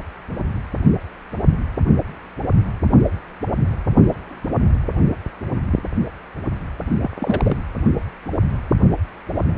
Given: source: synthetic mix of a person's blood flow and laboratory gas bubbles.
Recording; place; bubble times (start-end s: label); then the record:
Doppler ultrasound of blood flow; precordium
7.02-7.10 s: bubbles
7.19-7.57 s: bubbles
From the record:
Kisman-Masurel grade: 212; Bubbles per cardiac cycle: several, 3 to 8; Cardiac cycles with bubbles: 1 to 10%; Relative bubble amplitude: moderate (0.250 to 0.450); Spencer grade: 1 (occasional bubble signal discernible with the cardiac motion signal, with majority of cardiac periods free of bubbles); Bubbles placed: anywhere in the cardiac cycle